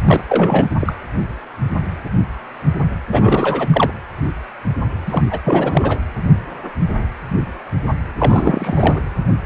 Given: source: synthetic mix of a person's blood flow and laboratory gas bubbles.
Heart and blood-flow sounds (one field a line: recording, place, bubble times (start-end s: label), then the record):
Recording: Doppler ultrasound of blood flow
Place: precordium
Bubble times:
0.04-0.22 s: bubbles
0.29-0.68 s: bubbles
0.80-0.94 s: bubbles
3.12-3.68 s: bubbles
3.71-3.92 s: bubbles
5.07-5.23 s: bubbles
5.31-5.40 s: bubbles
5.45-5.99 s: bubbles
8.19-9.00 s: bubbles
From the record:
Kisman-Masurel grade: 333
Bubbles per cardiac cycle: rolling drumbeat, 9 or more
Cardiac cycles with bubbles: 50 to 99%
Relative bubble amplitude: loud (0.450 to 0.775)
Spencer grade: 3 (all of the cardiac periods contain showers or single bubble signals, but not dominating or overriding the cardiac motion signals)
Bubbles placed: anywhere in the cardiac cycle